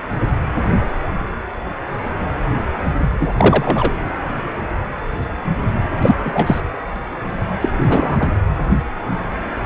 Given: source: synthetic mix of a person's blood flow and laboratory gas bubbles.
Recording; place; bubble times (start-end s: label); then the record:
Doppler ultrasound of blood flow; precordium
3.20-3.29 s: bubbles
3.33-3.92 s: bubbles
6.02-6.15 s: bubbles
6.25-6.61 s: bubbles
7.61-7.69 s: bubbles
7.79-8.31 s: bubbles
From the record:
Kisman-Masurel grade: 223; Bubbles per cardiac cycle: several, 3 to 8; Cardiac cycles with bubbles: 10 to 50%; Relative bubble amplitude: loud (0.450 to 0.775); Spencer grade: 2 (many but less than half of the cardiac periods contain bubble signals, singularly or in groups); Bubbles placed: anywhere in the cardiac cycle